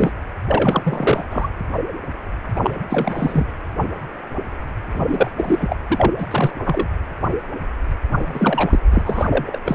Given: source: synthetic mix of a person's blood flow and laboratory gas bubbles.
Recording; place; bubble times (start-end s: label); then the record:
Doppler ultrasound of blood flow; precordium
0.00-0.13 s: bubbles
0.48-1.26 s: bubbles
1.30-1.48 s: bubbles
2.56-2.75 s: bubbles
2.90-3.46 s: bubbles
4.93-5.31 s: bubbles
5.38-5.76 s: bubbles
5.88-6.11 s: bubbles
6.18-6.27 s: bubbles
6.30-6.54 s: bubbles
6.65-6.88 s: bubbles
8.17-8.79 s: bubbles
8.91-9.26 s: bubbles
9.30-9.58 s: bubbles
9.65-9.75 s: bubbles
From the record:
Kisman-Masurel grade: 333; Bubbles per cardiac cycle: rolling drumbeat, 9 or more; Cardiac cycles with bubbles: 50 to 99%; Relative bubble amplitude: loud (0.450 to 0.775); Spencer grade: 3 (all of the cardiac periods contain showers or single bubble signals, but not dominating or overriding the cardiac motion signals); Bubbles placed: anywhere in the cardiac cycle